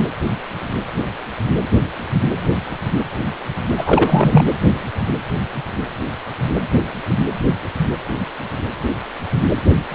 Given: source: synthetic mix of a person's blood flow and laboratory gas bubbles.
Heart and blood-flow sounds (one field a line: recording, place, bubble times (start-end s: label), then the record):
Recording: Doppler ultrasound of blood flow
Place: precordium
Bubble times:
0.00-0.07 s: bubbles
3.77-4.45 s: bubbles
From the record:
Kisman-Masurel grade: 223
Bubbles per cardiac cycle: several, 3 to 8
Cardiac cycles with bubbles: 10 to 50%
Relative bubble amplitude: loud (0.450 to 0.775)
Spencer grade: 2 (many but less than half of the cardiac periods contain bubble signals, singularly or in groups)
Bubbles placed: anywhere in the cardiac cycle